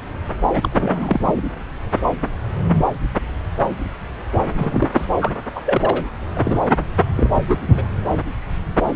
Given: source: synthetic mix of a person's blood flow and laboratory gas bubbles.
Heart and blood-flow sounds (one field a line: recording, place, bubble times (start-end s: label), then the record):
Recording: Doppler ultrasound of blood flow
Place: subclavian vein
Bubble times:
0.52-1.42 s: bubbles
4.58-4.88 s: bubbles
4.92-5.05 s: bubbles
5.20-5.31 s: bubbles
5.55-5.62 s: bubbles
5.65-6.05 s: bubbles
6.35-6.62 s: bubbles
7.16-7.29 s: bubbles
7.48-7.58 s: bubbles
7.61-7.82 s: bubbles
From the record:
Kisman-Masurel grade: 222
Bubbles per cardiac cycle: several, 3 to 8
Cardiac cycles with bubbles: 10 to 50%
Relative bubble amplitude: moderate (0.250 to 0.450)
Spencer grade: 2 (many but less than half of the cardiac periods contain bubble signals, singularly or in groups)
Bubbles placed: anywhere in the cardiac cycle